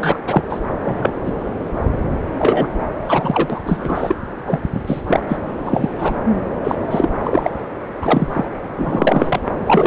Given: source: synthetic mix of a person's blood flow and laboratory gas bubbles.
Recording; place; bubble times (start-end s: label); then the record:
Doppler ultrasound of blood flow; subclavian vein
0.00-0.17 s: bubbles
0.26-0.43 s: bubbles
0.49-0.59 s: bubbles
0.83-1.12 s: bubbles
1.25-1.32 s: bubbles
2.38-2.68 s: bubbles
3.04-3.59 s: bubbles
3.65-4.16 s: bubbles
4.47-4.62 s: bubbles
4.74-4.82 s: bubbles
4.87-5.02 s: bubbles
5.07-5.21 s: bubbles
5.29-5.37 s: bubbles
5.66-5.90 s: bubbles
5.98-6.15 s: bubbles
6.64-6.75 s: bubbles
6.91-7.09 s: bubbles
7.23-7.51 s: bubbles
8.01-8.45 s: bubbles
8.78-9.40 s: bubbles
9.66-9.87 s: bubbles
From the record:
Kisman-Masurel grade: 233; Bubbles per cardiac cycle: several, 3 to 8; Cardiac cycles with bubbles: 50 to 99%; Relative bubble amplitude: loud (0.450 to 0.775); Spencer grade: 3 (all of the cardiac periods contain showers or single bubble signals, but not dominating or overriding the cardiac motion signals); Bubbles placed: anywhere in the cardiac cycle